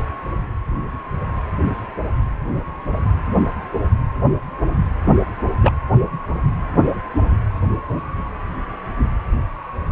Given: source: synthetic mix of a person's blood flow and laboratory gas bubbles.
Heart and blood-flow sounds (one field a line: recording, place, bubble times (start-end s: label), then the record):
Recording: Doppler ultrasound of blood flow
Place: precordium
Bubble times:
5.04-5.14 s: bubbles
5.62-5.73 s: bubbles
From the record:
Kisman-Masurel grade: 112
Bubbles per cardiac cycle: 1 to 2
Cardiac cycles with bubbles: 1 to 10%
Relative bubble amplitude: moderate (0.250 to 0.450)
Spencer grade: 1 (occasional bubble signal discernible with the cardiac motion signal, with majority of cardiac periods free of bubbles)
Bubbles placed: anywhere in the cardiac cycle